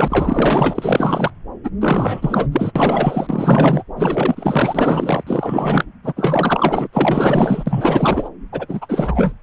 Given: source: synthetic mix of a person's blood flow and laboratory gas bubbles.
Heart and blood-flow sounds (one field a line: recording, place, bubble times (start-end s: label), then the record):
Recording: Doppler ultrasound of blood flow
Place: subclavian vein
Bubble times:
0.00-1.31 s: bubbles
1.64-1.70 s: bubbles
1.81-2.46 s: bubbles
2.52-2.71 s: bubbles
2.75-3.83 s: bubbles
3.96-5.23 s: bubbles
5.26-5.84 s: bubbles
6.03-6.12 s: bubbles
6.16-6.88 s: bubbles
6.92-7.63 s: bubbles
7.66-8.29 s: bubbles
8.53-9.32 s: bubbles
From the record:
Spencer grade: 4 (maximum detectable bubble signal sounding continuously throughout systole and diastole of every cardiac period, and overriding the amplitude of the normal cardiac signals)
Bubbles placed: anywhere in the cardiac cycle